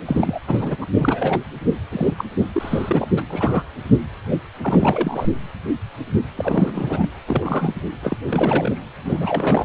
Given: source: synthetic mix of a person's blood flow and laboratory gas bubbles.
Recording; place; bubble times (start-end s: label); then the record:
Doppler ultrasound of blood flow; precordium
0.05-0.39 s: bubbles
0.48-0.76 s: bubbles
0.81-0.85 s: bubbles
0.96-1.40 s: bubbles
1.92-2.14 s: bubbles
2.18-2.24 s: bubbles
2.39-2.46 s: bubbles
2.54-3.08 s: bubbles
3.16-3.23 s: bubbles
3.30-3.64 s: bubbles
4.61-5.27 s: bubbles
6.35-7.09 s: bubbles
7.27-7.73 s: bubbles
8.03-8.17 s: bubbles
8.28-8.79 s: bubbles
8.98-9.65 s: bubbles
From the record:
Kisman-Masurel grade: 332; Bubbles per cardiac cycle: rolling drumbeat, 9 or more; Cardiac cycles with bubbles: 50 to 99%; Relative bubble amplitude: moderate (0.250 to 0.450); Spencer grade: 3 (all of the cardiac periods contain showers or single bubble signals, but not dominating or overriding the cardiac motion signals); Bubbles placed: anywhere in the cardiac cycle